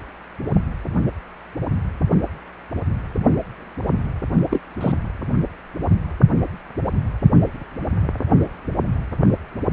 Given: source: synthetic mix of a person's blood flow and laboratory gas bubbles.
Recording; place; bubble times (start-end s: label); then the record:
Doppler ultrasound of blood flow; precordium
4.50-4.61 s: bubbles
4.80-4.92 s: bubbles
From the record:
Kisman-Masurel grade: 112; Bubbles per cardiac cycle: 1 to 2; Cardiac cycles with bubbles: 1 to 10%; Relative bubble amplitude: moderate (0.250 to 0.450); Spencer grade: 1 (occasional bubble signal discernible with the cardiac motion signal, with majority of cardiac periods free of bubbles); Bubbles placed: anywhere in the cardiac cycle